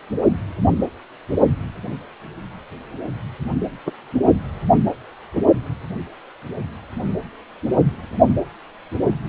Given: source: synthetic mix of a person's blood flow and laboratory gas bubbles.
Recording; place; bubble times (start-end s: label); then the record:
Doppler ultrasound of blood flow; precordium
3.86-3.91 s: bubbles
From the record:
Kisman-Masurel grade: 123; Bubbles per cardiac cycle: 1 to 2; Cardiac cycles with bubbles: 10 to 50%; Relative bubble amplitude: loud (0.450 to 0.775); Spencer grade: 2 (many but less than half of the cardiac periods contain bubble signals, singularly or in groups); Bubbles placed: only in the low amplitude regions of the cardiac cycle